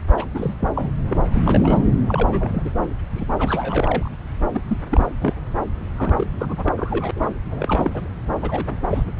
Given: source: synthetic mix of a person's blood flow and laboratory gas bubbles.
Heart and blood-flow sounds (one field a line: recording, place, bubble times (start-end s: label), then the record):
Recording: Doppler ultrasound of blood flow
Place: subclavian vein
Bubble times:
0.16-0.26 s: bubbles
0.34-0.54 s: bubbles
0.60-0.70 s: bubbles
0.75-0.92 s: bubbles
1.07-1.20 s: bubbles
1.24-1.85 s: bubbles
2.08-2.70 s: bubbles
3.15-3.25 s: bubbles
3.32-4.10 s: bubbles
4.54-4.61 s: bubbles
4.67-4.78 s: bubbles
4.90-5.12 s: bubbles
5.21-5.33 s: bubbles
5.97-6.27 s: bubbles
6.38-6.72 s: bubbles
6.77-7.11 s: bubbles
7.16-7.31 s: bubbles
7.50-8.09 s: bubbles
8.42-8.78 s: bubbles
8.88-9.04 s: bubbles
9.17-9.20 s: bubbles
From the record:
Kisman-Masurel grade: 342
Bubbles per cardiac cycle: rolling drumbeat, 9 or more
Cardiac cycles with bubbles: 100%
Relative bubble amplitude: moderate (0.250 to 0.450)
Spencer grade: 3 (all of the cardiac periods contain showers or single bubble signals, but not dominating or overriding the cardiac motion signals)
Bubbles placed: anywhere in the cardiac cycle